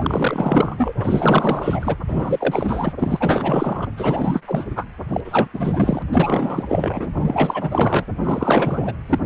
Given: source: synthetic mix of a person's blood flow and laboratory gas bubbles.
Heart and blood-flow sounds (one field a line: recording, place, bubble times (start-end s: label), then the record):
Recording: Doppler ultrasound of blood flow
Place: precordium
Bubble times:
0.00-0.94 s: bubbles
0.98-1.96 s: bubbles
2.07-2.92 s: bubbles
3.00-3.88 s: bubbles
3.97-4.42 s: bubbles
4.47-4.65 s: bubbles
4.75-4.85 s: bubbles
5.09-5.21 s: bubbles
5.25-5.47 s: bubbles
5.53-6.02 s: bubbles
6.12-7.08 s: bubbles
7.14-8.04 s: bubbles
8.23-8.94 s: bubbles
9.09-9.19 s: bubbles
9.24-9.26 s: bubbles
From the record:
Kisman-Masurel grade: 444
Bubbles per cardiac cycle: continuous sound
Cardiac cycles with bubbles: 100%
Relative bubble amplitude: maximal (0.775 to 0.999)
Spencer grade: 4 (maximum detectable bubble signal sounding continuously throughout systole and diastole of every cardiac period, and overriding the amplitude of the normal cardiac signals)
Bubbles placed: anywhere in the cardiac cycle